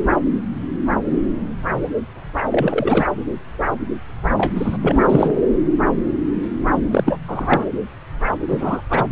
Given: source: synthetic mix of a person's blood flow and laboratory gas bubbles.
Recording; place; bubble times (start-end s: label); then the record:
Doppler ultrasound of blood flow; subclavian vein
2.51-3.06 s: bubbles
4.37-4.52 s: bubbles
4.57-4.77 s: bubbles
4.81-5.35 s: bubbles
6.91-7.19 s: bubbles
7.27-7.65 s: bubbles
8.48-8.81 s: bubbles
8.90-9.04 s: bubbles
From the record:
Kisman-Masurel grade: 223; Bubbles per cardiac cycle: several, 3 to 8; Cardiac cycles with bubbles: 10 to 50%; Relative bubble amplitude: loud (0.450 to 0.775); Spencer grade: 2 (many but less than half of the cardiac periods contain bubble signals, singularly or in groups); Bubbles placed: anywhere in the cardiac cycle